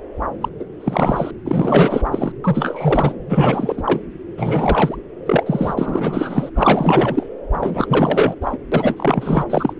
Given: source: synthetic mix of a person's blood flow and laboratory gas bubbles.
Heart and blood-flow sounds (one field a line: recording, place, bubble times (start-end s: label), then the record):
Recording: Doppler ultrasound of blood flow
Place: subclavian vein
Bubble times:
0.41-0.49 s: bubbles
0.59-0.65 s: bubbles
0.79-1.31 s: bubbles
1.45-2.32 s: bubbles
2.44-3.15 s: bubbles
3.29-4.00 s: bubbles
4.37-4.96 s: bubbles
5.25-5.43 s: bubbles
5.46-5.74 s: bubbles
5.77-6.50 s: bubbles
6.55-7.28 s: bubbles
7.52-8.36 s: bubbles
8.41-8.58 s: bubbles
8.72-9.45 s: bubbles
9.50-9.74 s: bubbles
From the record:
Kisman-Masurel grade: 444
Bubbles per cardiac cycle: continuous sound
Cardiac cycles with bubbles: 100%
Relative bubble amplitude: maximal (0.775 to 0.999)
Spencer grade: 4 (maximum detectable bubble signal sounding continuously throughout systole and diastole of every cardiac period, and overriding the amplitude of the normal cardiac signals)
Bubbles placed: anywhere in the cardiac cycle